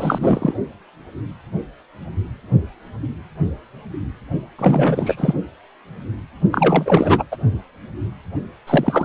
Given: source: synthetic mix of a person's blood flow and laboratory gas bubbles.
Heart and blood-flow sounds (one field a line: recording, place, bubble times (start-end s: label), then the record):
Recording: Doppler ultrasound of blood flow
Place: precordium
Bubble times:
0.00-0.54 s: bubbles
4.58-5.33 s: bubbles
6.51-7.24 s: bubbles
7.32-7.37 s: bubbles
8.66-9.05 s: bubbles
From the record:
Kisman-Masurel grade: 333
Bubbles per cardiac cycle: rolling drumbeat, 9 or more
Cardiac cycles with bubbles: 50 to 99%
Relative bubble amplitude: loud (0.450 to 0.775)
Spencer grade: 3 (all of the cardiac periods contain showers or single bubble signals, but not dominating or overriding the cardiac motion signals)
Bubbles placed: only in the low amplitude regions of the cardiac cycle